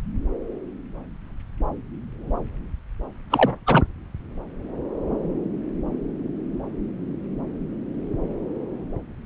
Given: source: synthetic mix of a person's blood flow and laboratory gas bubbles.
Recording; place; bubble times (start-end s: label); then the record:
Doppler ultrasound of blood flow; subclavian vein
3.30-3.56 s: bubbles
3.66-3.86 s: bubbles
From the record:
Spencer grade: 1 (occasional bubble signal discernible with the cardiac motion signal, with majority of cardiac periods free of bubbles); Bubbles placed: anywhere in the cardiac cycle